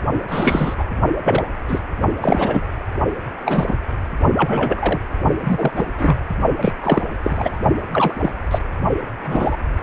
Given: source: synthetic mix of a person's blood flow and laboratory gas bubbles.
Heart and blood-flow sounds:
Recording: Doppler ultrasound of blood flow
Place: precordium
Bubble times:
0.28-0.76 s: bubbles
0.78-0.84 s: bubbles
1.23-1.44 s: bubbles
1.68-1.81 s: bubbles
2.22-2.61 s: bubbles
3.45-3.65 s: bubbles
3.67-3.75 s: bubbles
4.36-5.00 s: bubbles
5.42-5.71 s: bubbles
5.76-5.86 s: bubbles
5.98-6.17 s: bubbles
6.61-6.72 s: bubbles
6.83-7.03 s: bubbles
7.21-7.59 s: bubbles
7.92-8.32 s: bubbles
8.50-8.58 s: bubbles
9.25-9.56 s: bubbles
From the record:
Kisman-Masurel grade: 243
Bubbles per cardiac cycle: several, 3 to 8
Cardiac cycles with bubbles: 100%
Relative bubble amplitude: loud (0.450 to 0.775)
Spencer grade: 3 (all of the cardiac periods contain showers or single bubble signals, but not dominating or overriding the cardiac motion signals)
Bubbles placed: only in the low amplitude regions of the cardiac cycle

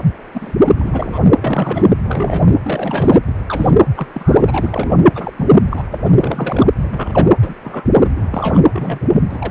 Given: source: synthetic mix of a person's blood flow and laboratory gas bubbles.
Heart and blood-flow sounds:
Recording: Doppler ultrasound of blood flow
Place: precordium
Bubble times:
0.34-0.54 s: bubbles
0.65-0.74 s: bubbles
0.78-1.19 s: bubbles
1.36-1.96 s: bubbles
2.03-2.58 s: bubbles
2.62-3.21 s: bubbles
3.27-3.34 s: bubbles
3.46-3.71 s: bubbles
3.95-4.07 s: bubbles
4.12-5.05 s: bubbles
5.15-5.33 s: bubbles
5.37-5.53 s: bubbles
5.71-5.83 s: bubbles
5.92-5.98 s: bubbles
6.04-6.12 s: bubbles
6.21-6.70 s: bubbles
6.78-7.29 s: bubbles
7.42-7.55 s: bubbles
7.64-7.92 s: bubbles
7.97-8.07 s: bubbles
8.13-8.22 s: bubbles
8.30-8.59 s: bubbles
8.72-8.99 s: bubbles
9.29-9.51 s: bubbles
From the record:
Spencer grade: 3 (all of the cardiac periods contain showers or single bubble signals, but not dominating or overriding the cardiac motion signals)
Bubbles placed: anywhere in the cardiac cycle

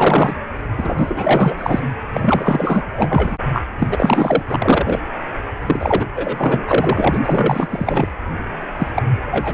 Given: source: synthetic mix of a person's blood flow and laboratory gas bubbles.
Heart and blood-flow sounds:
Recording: Doppler ultrasound of blood flow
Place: precordium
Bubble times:
0.00-0.36 s: bubbles
0.77-1.80 s: bubbles
2.14-2.83 s: bubbles
2.96-3.36 s: bubbles
3.53-3.64 s: bubbles
3.78-4.42 s: bubbles
4.47-5.00 s: bubbles
5.66-6.04 s: bubbles
6.15-7.22 s: bubbles
7.25-7.67 s: bubbles
7.70-8.08 s: bubbles
8.78-8.88 s: bubbles
8.96-9.03 s: bubbles
9.26-9.54 s: bubbles
From the record:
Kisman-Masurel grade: 444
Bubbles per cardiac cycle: continuous sound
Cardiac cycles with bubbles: 100%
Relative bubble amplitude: maximal (0.775 to 0.999)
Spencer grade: 4 (maximum detectable bubble signal sounding continuously throughout systole and diastole of every cardiac period, and overriding the amplitude of the normal cardiac signals)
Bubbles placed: anywhere in the cardiac cycle

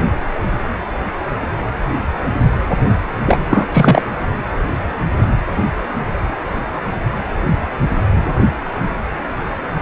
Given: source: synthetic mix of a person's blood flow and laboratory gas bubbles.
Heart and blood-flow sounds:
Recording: Doppler ultrasound of blood flow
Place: precordium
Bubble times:
3.26-3.40 s: bubbles
3.51-3.68 s: bubbles
3.72-4.02 s: bubbles
From the record:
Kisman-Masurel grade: 213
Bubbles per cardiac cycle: several, 3 to 8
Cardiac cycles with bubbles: 1 to 10%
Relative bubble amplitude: loud (0.450 to 0.775)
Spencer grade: 1 (occasional bubble signal discernible with the cardiac motion signal, with majority of cardiac periods free of bubbles)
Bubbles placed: anywhere in the cardiac cycle

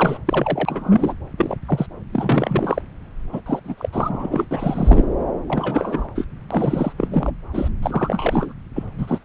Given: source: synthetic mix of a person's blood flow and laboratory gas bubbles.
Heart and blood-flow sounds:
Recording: Doppler ultrasound of blood flow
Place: subclavian vein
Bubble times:
0.00-0.18 s: bubbles
0.26-1.15 s: bubbles
1.38-1.56 s: bubbles
1.68-1.86 s: bubbles
2.12-2.82 s: bubbles
3.33-3.40 s: bubbles
3.46-3.60 s: bubbles
3.64-3.75 s: bubbles
3.77-3.89 s: bubbles
3.92-4.46 s: bubbles
4.51-5.04 s: bubbles
5.47-6.07 s: bubbles
6.15-6.25 s: bubbles
6.50-6.93 s: bubbles
6.97-7.32 s: bubbles
7.52-7.68 s: bubbles
7.82-8.54 s: bubbles
8.75-8.84 s: bubbles
8.98-9.19 s: bubbles
From the record:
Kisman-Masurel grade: 333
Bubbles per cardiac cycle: rolling drumbeat, 9 or more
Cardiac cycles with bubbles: 50 to 99%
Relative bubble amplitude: loud (0.450 to 0.775)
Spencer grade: 3 (all of the cardiac periods contain showers or single bubble signals, but not dominating or overriding the cardiac motion signals)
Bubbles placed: anywhere in the cardiac cycle

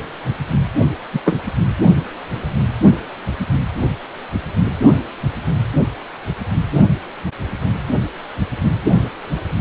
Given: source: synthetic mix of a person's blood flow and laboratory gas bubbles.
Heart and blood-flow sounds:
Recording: Doppler ultrasound of blood flow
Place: precordium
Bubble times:
1.12-1.20 s: bubbles
1.24-1.38 s: bubbles
From the record:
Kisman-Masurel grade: 123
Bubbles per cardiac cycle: 1 to 2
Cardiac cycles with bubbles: 10 to 50%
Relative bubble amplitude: loud (0.450 to 0.775)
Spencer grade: 2 (many but less than half of the cardiac periods contain bubble signals, singularly or in groups)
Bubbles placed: only in the low amplitude regions of the cardiac cycle

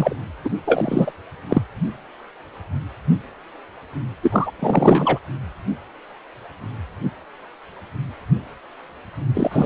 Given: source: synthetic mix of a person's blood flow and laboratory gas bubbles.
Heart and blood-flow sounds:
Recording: Doppler ultrasound of blood flow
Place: precordium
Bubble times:
0.00-0.16 s: bubbles
0.45-0.50 s: bubbles
0.64-1.12 s: bubbles
1.49-1.62 s: bubbles
4.22-4.51 s: bubbles
4.59-5.19 s: bubbles
9.34-9.66 s: bubbles
From the record:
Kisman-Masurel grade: 233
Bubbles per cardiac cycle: several, 3 to 8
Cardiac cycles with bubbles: 50 to 99%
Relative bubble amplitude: loud (0.450 to 0.775)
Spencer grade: 3 (all of the cardiac periods contain showers or single bubble signals, but not dominating or overriding the cardiac motion signals)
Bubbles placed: anywhere in the cardiac cycle

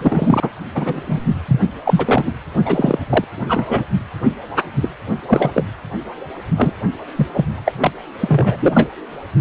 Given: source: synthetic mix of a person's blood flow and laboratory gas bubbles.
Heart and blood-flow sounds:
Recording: Doppler ultrasound of blood flow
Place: precordium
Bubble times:
0.01-0.50 s: bubbles
0.75-1.21 s: bubbles
1.48-1.61 s: bubbles
1.85-2.31 s: bubbles
2.65-2.98 s: bubbles
3.10-3.24 s: bubbles
3.48-3.83 s: bubbles
4.81-4.89 s: bubbles
5.26-5.51 s: bubbles
5.54-5.63 s: bubbles
6.57-6.73 s: bubbles
7.15-7.26 s: bubbles
7.33-7.45 s: bubbles
7.57-7.61 s: bubbles
7.65-7.72 s: bubbles
7.80-7.91 s: bubbles
8.20-8.88 s: bubbles
From the record:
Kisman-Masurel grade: 243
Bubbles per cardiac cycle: several, 3 to 8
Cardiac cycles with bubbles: 100%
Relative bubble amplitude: loud (0.450 to 0.775)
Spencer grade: 3 (all of the cardiac periods contain showers or single bubble signals, but not dominating or overriding the cardiac motion signals)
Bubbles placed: anywhere in the cardiac cycle

